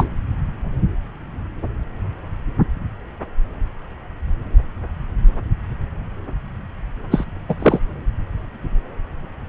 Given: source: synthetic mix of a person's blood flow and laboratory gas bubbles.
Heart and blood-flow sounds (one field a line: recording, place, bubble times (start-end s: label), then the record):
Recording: Doppler ultrasound of blood flow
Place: subclavian vein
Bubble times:
0.00-0.09 s: bubbles
7.11-7.25 s: bubbles
7.48-7.55 s: bubbles
7.59-7.79 s: bubbles
From the record:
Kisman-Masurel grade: 223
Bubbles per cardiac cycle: several, 3 to 8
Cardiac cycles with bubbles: 10 to 50%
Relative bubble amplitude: loud (0.450 to 0.775)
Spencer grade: 2 (many but less than half of the cardiac periods contain bubble signals, singularly or in groups)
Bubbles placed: anywhere in the cardiac cycle